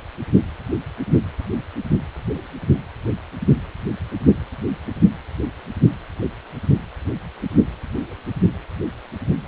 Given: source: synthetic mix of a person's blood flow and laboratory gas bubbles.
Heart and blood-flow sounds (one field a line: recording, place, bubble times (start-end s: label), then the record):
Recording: Doppler ultrasound of blood flow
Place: precordium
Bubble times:
no bubbles
From the record:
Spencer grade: 0 (complete lack of bubble signals)